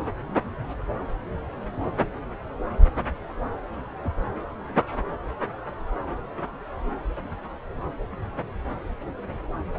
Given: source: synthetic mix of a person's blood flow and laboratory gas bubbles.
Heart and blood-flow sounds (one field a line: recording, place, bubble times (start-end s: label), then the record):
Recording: Doppler ultrasound of blood flow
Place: subclavian vein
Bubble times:
no bubbles
From the record:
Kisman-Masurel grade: 000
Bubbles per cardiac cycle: 0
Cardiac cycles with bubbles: 0%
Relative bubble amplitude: no bubbles discernible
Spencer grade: 0 (complete lack of bubble signals)